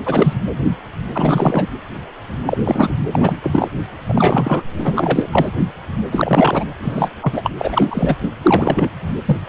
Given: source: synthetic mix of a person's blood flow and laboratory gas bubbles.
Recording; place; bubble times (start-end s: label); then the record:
Doppler ultrasound of blood flow; precordium
0.05-0.34 s: bubbles
1.12-1.67 s: bubbles
2.45-2.58 s: bubbles
2.65-2.97 s: bubbles
3.12-3.38 s: bubbles
3.42-3.68 s: bubbles
4.05-4.63 s: bubbles
4.77-5.29 s: bubbles
5.31-5.50 s: bubbles
6.11-6.65 s: bubbles
6.82-7.09 s: bubbles
7.22-7.50 s: bubbles
7.58-8.15 s: bubbles
8.42-8.89 s: bubbles
9.25-9.37 s: bubbles
From the record:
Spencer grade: 3 (all of the cardiac periods contain showers or single bubble signals, but not dominating or overriding the cardiac motion signals); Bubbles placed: anywhere in the cardiac cycle